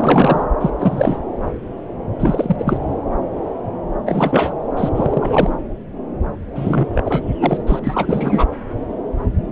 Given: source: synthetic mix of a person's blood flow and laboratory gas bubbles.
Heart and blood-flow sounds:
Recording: Doppler ultrasound of blood flow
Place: subclavian vein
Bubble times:
0.00-0.46 s: bubbles
0.59-0.70 s: bubbles
0.79-1.18 s: bubbles
2.19-2.77 s: bubbles
4.06-4.54 s: bubbles
4.76-4.89 s: bubbles
4.95-5.50 s: bubbles
6.55-6.87 s: bubbles
6.94-7.24 s: bubbles
7.41-7.58 s: bubbles
7.67-7.79 s: bubbles
7.83-8.46 s: bubbles
From the record:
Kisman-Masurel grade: 333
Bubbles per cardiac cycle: rolling drumbeat, 9 or more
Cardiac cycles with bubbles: 50 to 99%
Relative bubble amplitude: loud (0.450 to 0.775)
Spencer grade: 3 (all of the cardiac periods contain showers or single bubble signals, but not dominating or overriding the cardiac motion signals)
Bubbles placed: anywhere in the cardiac cycle

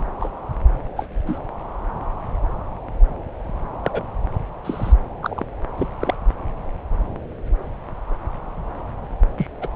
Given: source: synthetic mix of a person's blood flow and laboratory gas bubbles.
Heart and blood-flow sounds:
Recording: Doppler ultrasound of blood flow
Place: subclavian vein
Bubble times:
0.20-0.29 s: bubbles
0.96-1.06 s: bubbles
1.26-1.39 s: bubbles
3.83-4.02 s: bubbles
4.65-4.92 s: bubbles
5.21-5.45 s: bubbles
5.78-5.88 s: bubbles
6.00-6.16 s: bubbles
9.38-9.47 s: bubbles
9.60-9.70 s: bubbles
From the record:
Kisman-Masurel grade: 122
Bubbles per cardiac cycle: 1 to 2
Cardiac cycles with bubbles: 10 to 50%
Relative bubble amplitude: moderate (0.250 to 0.450)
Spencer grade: 2 (many but less than half of the cardiac periods contain bubble signals, singularly or in groups)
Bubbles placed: anywhere in the cardiac cycle

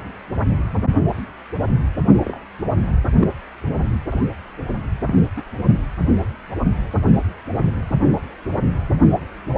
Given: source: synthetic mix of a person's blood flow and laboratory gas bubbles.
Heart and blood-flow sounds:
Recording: Doppler ultrasound of blood flow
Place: precordium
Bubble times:
0.00-0.05 s: bubbles
2.25-2.40 s: bubbles
3.20-3.28 s: bubbles
4.12-4.24 s: bubbles
5.07-5.14 s: bubbles
5.36-5.42 s: bubbles
From the record:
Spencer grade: 2 (many but less than half of the cardiac periods contain bubble signals, singularly or in groups)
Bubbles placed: anywhere in the cardiac cycle

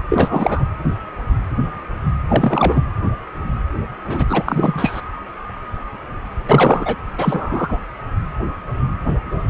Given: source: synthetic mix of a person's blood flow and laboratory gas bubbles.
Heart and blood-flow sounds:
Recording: Doppler ultrasound of blood flow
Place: precordium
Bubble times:
0.09-0.65 s: bubbles
2.29-2.80 s: bubbles
4.05-4.25 s: bubbles
4.29-5.01 s: bubbles
6.46-6.96 s: bubbles
7.17-7.79 s: bubbles
From the record:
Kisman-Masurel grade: 223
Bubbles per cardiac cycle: several, 3 to 8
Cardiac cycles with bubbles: 10 to 50%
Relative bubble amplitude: loud (0.450 to 0.775)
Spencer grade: 2 (many but less than half of the cardiac periods contain bubble signals, singularly or in groups)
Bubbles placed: anywhere in the cardiac cycle

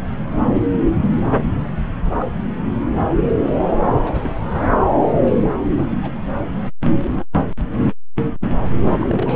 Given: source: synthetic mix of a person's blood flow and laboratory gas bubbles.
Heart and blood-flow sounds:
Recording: Doppler ultrasound of blood flow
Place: subclavian vein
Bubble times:
2.04-2.41 s: bubbles
3.78-3.95 s: bubbles
4.04-4.65 s: bubbles
5.24-5.33 s: bubbles
5.37-5.57 s: bubbles
5.62-6.12 s: bubbles
8.98-9.36 s: bubbles
From the record:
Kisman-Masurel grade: 221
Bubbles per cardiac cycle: several, 3 to 8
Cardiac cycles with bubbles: 10 to 50%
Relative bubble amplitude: barely perceptible (0.100 to 0.250)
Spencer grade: 2 (many but less than half of the cardiac periods contain bubble signals, singularly or in groups)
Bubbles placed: anywhere in the cardiac cycle

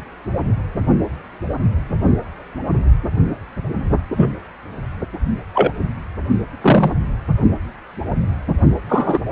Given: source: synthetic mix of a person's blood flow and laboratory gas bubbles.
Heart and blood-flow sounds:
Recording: Doppler ultrasound of blood flow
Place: precordium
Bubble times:
4.17-4.30 s: bubbles
5.54-5.73 s: bubbles
6.61-6.93 s: bubbles
8.89-9.19 s: bubbles
From the record:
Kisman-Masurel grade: 123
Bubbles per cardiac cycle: 1 to 2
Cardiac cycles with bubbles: 10 to 50%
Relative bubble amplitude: loud (0.450 to 0.775)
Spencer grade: 2 (many but less than half of the cardiac periods contain bubble signals, singularly or in groups)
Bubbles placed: only in the low amplitude regions of the cardiac cycle

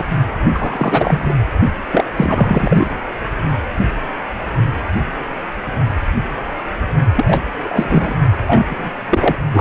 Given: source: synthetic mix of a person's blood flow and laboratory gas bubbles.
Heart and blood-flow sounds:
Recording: Doppler ultrasound of blood flow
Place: precordium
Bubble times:
0.00-0.04 s: bubbles
0.54-1.34 s: bubbles
1.92-2.04 s: bubbles
2.17-2.91 s: bubbles
7.17-7.44 s: bubbles
7.63-8.15 s: bubbles
8.47-8.66 s: bubbles
8.69-8.90 s: bubbles
9.10-9.36 s: bubbles
9.54-9.61 s: bubbles
From the record:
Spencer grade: 3 (all of the cardiac periods contain showers or single bubble signals, but not dominating or overriding the cardiac motion signals)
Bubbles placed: only in the low amplitude regions of the cardiac cycle

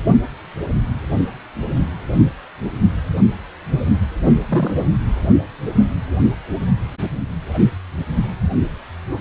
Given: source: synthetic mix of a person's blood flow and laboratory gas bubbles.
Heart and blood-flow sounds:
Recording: Doppler ultrasound of blood flow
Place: precordium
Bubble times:
4.23-4.38 s: bubbles
4.48-4.84 s: bubbles
From the record:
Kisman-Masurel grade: 212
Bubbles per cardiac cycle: several, 3 to 8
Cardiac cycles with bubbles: 1 to 10%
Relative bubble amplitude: moderate (0.250 to 0.450)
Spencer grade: 1 (occasional bubble signal discernible with the cardiac motion signal, with majority of cardiac periods free of bubbles)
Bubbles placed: anywhere in the cardiac cycle

